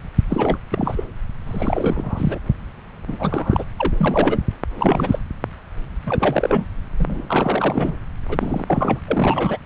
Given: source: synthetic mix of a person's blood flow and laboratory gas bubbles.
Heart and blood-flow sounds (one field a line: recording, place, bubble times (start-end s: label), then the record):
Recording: Doppler ultrasound of blood flow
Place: subclavian vein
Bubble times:
0.30-0.57 s: bubbles
0.72-1.04 s: bubbles
1.45-2.39 s: bubbles
3.08-3.64 s: bubbles
3.77-3.94 s: bubbles
3.97-4.40 s: bubbles
4.77-5.19 s: bubbles
6.06-6.65 s: bubbles
6.99-7.21 s: bubbles
7.29-7.97 s: bubbles
8.29-9.00 s: bubbles
9.07-9.58 s: bubbles
From the record:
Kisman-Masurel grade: 332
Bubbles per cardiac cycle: rolling drumbeat, 9 or more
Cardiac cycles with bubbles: 50 to 99%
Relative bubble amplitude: moderate (0.250 to 0.450)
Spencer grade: 3 (all of the cardiac periods contain showers or single bubble signals, but not dominating or overriding the cardiac motion signals)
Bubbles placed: anywhere in the cardiac cycle